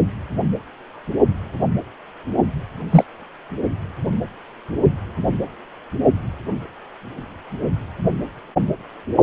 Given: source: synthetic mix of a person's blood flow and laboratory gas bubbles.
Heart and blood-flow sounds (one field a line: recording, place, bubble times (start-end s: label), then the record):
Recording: Doppler ultrasound of blood flow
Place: precordium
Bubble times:
2.90-3.04 s: bubbles
From the record:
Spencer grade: 1 (occasional bubble signal discernible with the cardiac motion signal, with majority of cardiac periods free of bubbles)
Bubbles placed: only in the low amplitude regions of the cardiac cycle